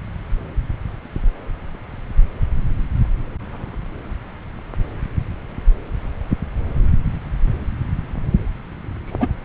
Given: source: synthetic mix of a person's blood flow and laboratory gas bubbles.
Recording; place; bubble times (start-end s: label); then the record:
Doppler ultrasound of blood flow; subclavian vein
9.05-9.33 s: bubbles
From the record:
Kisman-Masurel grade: 112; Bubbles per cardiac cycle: 1 to 2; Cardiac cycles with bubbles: 1 to 10%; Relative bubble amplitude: moderate (0.250 to 0.450); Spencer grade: 1 (occasional bubble signal discernible with the cardiac motion signal, with majority of cardiac periods free of bubbles); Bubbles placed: anywhere in the cardiac cycle